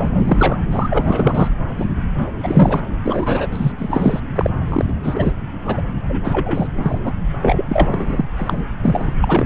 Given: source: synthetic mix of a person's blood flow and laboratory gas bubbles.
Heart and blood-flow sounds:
Doppler ultrasound of blood flow; subclavian vein
0.00-0.57 s: bubbles
0.71-1.49 s: bubbles
1.79-1.87 s: bubbles
2.17-2.31 s: bubbles
2.43-2.81 s: bubbles
3.03-3.48 s: bubbles
3.52-3.72 s: bubbles
3.79-4.20 s: bubbles
4.36-4.50 s: bubbles
4.69-4.85 s: bubbles
4.88-4.92 s: bubbles
5.03-5.33 s: bubbles
5.67-5.83 s: bubbles
6.08-6.67 s: bubbles
6.74-6.99 s: bubbles
7.01-7.12 s: bubbles
7.42-8.25 s: bubbles
8.37-8.64 s: bubbles
8.82-9.13 s: bubbles
9.21-9.46 s: bubbles
From the record:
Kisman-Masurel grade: 343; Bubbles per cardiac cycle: rolling drumbeat, 9 or more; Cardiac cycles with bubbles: 100%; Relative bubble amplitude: loud (0.450 to 0.775); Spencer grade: 3 (all of the cardiac periods contain showers or single bubble signals, but not dominating or overriding the cardiac motion signals); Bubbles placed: anywhere in the cardiac cycle

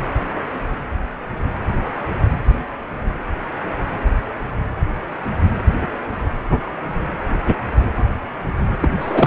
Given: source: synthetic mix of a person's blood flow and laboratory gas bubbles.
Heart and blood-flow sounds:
Doppler ultrasound of blood flow; precordium
8.81-8.88 s: bubbles
8.99-9.27 s: bubbles
From the record:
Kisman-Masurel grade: 212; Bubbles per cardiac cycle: several, 3 to 8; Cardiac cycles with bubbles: 1 to 10%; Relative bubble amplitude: moderate (0.250 to 0.450); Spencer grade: 1 (occasional bubble signal discernible with the cardiac motion signal, with majority of cardiac periods free of bubbles); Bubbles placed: anywhere in the cardiac cycle

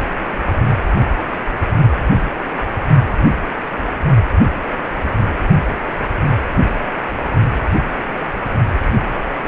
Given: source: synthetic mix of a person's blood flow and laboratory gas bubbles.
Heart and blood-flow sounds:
Doppler ultrasound of blood flow; precordium
no bubbles
From the record:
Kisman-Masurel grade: 000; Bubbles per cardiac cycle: 0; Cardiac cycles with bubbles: 0%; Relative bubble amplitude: no bubbles discernible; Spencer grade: 0 (complete lack of bubble signals)

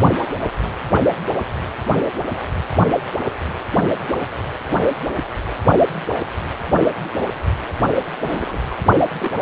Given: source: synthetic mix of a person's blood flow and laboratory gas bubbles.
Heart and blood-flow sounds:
Doppler ultrasound of blood flow; precordium
8.21-8.58 s: bubbles
8.70-8.74 s: bubbles
9.18-9.31 s: bubbles
From the record:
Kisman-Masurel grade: 121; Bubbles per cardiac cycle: 1 to 2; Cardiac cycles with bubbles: 10 to 50%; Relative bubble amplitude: barely perceptible (0.100 to 0.250); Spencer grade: 2 (many but less than half of the cardiac periods contain bubble signals, singularly or in groups); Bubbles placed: only in the low amplitude regions of the cardiac cycle

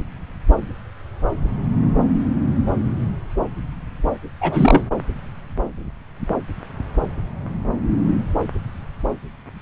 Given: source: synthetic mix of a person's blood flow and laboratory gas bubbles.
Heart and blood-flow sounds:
Doppler ultrasound of blood flow; subclavian vein
4.41-4.80 s: bubbles
From the record:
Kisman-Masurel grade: 212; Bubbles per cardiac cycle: several, 3 to 8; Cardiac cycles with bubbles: 1 to 10%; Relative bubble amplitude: moderate (0.250 to 0.450); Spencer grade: 1 (occasional bubble signal discernible with the cardiac motion signal, with majority of cardiac periods free of bubbles); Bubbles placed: anywhere in the cardiac cycle

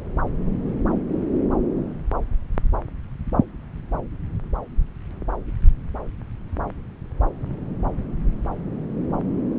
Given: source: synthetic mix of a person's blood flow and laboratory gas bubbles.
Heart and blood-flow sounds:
Doppler ultrasound of blood flow; subclavian vein
no bubbles
From the record:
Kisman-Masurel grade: 000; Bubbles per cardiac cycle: 0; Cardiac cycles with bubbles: 0%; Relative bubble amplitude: no bubbles discernible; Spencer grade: 0 (complete lack of bubble signals)

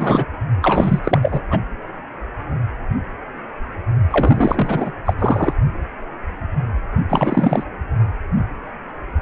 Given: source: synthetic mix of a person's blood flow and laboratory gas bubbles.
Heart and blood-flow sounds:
Doppler ultrasound of blood flow; precordium
0.00-0.25 s: bubbles
0.61-0.99 s: bubbles
1.03-1.42 s: bubbles
1.50-1.60 s: bubbles
4.09-4.92 s: bubbles
5.05-5.16 s: bubbles
5.18-5.54 s: bubbles
7.09-7.63 s: bubbles
From the record:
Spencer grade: 3 (all of the cardiac periods contain showers or single bubble signals, but not dominating or overriding the cardiac motion signals); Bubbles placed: anywhere in the cardiac cycle

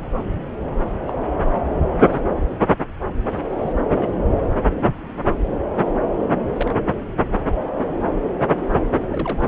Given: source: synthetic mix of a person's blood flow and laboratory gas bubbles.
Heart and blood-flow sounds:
Doppler ultrasound of blood flow; subclavian vein
1.07-1.11 s: bubbles
2.09-2.21 s: bubbles
3.29-3.74 s: bubbles
3.92-4.22 s: bubbles
6.56-6.74 s: bubbles
7.20-7.26 s: bubbles
8.94-8.97 s: bubbles
9.12-9.43 s: bubbles
From the record:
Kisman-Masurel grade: 121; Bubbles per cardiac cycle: 1 to 2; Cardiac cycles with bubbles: 10 to 50%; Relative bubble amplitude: barely perceptible (0.100 to 0.250); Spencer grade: 2 (many but less than half of the cardiac periods contain bubble signals, singularly or in groups); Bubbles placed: anywhere in the cardiac cycle

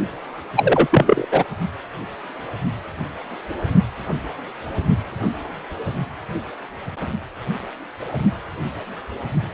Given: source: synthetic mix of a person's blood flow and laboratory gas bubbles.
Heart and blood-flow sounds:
Doppler ultrasound of blood flow; precordium
0.56-0.87 s: bubbles
0.92-1.26 s: bubbles
1.31-1.44 s: bubbles
From the record:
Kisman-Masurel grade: 213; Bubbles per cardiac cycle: several, 3 to 8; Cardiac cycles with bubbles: 1 to 10%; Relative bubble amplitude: loud (0.450 to 0.775); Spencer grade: 1 (occasional bubble signal discernible with the cardiac motion signal, with majority of cardiac periods free of bubbles); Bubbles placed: only in the low amplitude regions of the cardiac cycle

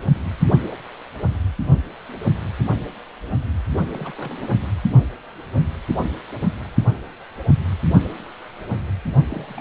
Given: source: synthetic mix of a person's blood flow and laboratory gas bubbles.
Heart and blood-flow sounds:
Doppler ultrasound of blood flow; precordium
3.75-4.13 s: bubbles
4.18-4.58 s: bubbles
9.29-9.61 s: bubbles
From the record:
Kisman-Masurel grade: 221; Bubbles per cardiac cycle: several, 3 to 8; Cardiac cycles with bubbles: 10 to 50%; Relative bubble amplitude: barely perceptible (0.100 to 0.250); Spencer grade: 2 (many but less than half of the cardiac periods contain bubble signals, singularly or in groups); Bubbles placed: anywhere in the cardiac cycle

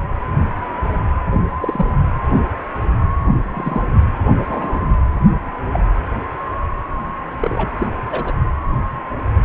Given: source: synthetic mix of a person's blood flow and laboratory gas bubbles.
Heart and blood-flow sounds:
Doppler ultrasound of blood flow; precordium
1.60-1.85 s: bubbles
3.54-3.82 s: bubbles
4.48-4.86 s: bubbles
5.72-5.84 s: bubbles
7.40-7.70 s: bubbles
7.78-7.88 s: bubbles
8.11-8.33 s: bubbles
From the record:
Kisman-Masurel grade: 122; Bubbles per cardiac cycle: 1 to 2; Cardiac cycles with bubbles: 10 to 50%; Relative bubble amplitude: moderate (0.250 to 0.450); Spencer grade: 2 (many but less than half of the cardiac periods contain bubble signals, singularly or in groups); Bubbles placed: anywhere in the cardiac cycle

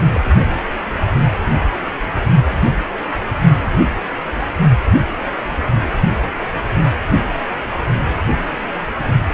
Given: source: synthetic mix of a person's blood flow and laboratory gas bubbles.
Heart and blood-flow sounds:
Doppler ultrasound of blood flow; precordium
0.14-0.20 s: bubbles
From the record:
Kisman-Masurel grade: 112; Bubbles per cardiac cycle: 1 to 2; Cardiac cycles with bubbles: 1 to 10%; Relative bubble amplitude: moderate (0.250 to 0.450); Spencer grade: 1 (occasional bubble signal discernible with the cardiac motion signal, with majority of cardiac periods free of bubbles); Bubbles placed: only in the low amplitude regions of the cardiac cycle

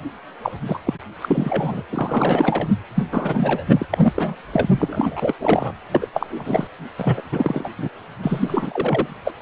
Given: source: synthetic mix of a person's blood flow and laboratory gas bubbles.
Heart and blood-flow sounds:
Doppler ultrasound of blood flow; precordium
0.42-0.52 s: bubbles
0.66-0.79 s: bubbles
0.86-0.93 s: bubbles
1.21-1.83 s: bubbles
1.92-2.68 s: bubbles
2.95-3.04 s: bubbles
3.12-3.63 s: bubbles
3.69-3.85 s: bubbles
3.90-4.12 s: bubbles
4.15-4.35 s: bubbles
4.51-4.68 s: bubbles
4.78-5.33 s: bubbles
5.40-5.72 s: bubbles
5.92-6.07 s: bubbles
6.13-6.67 s: bubbles
6.97-7.21 s: bubbles
7.32-7.70 s: bubbles
7.78-7.88 s: bubbles
8.22-9.07 s: bubbles
9.24-9.33 s: bubbles
9.40-9.42 s: bubbles
From the record:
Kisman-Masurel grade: 342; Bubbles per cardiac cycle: rolling drumbeat, 9 or more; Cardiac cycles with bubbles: 100%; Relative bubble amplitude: moderate (0.250 to 0.450); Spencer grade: 3 (all of the cardiac periods contain showers or single bubble signals, but not dominating or overriding the cardiac motion signals); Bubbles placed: anywhere in the cardiac cycle

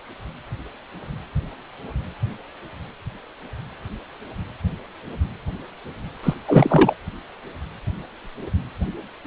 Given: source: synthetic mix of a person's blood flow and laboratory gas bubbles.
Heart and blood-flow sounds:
Doppler ultrasound of blood flow; precordium
6.23-6.34 s: bubbles
6.47-6.93 s: bubbles
From the record:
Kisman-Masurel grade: 213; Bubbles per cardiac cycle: several, 3 to 8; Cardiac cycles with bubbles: 1 to 10%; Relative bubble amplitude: loud (0.450 to 0.775); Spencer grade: 1 (occasional bubble signal discernible with the cardiac motion signal, with majority of cardiac periods free of bubbles); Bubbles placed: anywhere in the cardiac cycle

